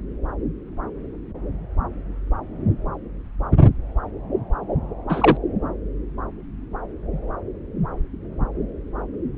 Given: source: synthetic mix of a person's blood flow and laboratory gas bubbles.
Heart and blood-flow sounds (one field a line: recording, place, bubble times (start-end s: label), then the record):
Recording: Doppler ultrasound of blood flow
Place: subclavian vein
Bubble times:
5.09-5.37 s: bubbles
From the record:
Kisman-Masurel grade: 113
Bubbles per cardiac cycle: 1 to 2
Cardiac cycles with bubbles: 1 to 10%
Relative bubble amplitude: loud (0.450 to 0.775)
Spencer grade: 1 (occasional bubble signal discernible with the cardiac motion signal, with majority of cardiac periods free of bubbles)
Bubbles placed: anywhere in the cardiac cycle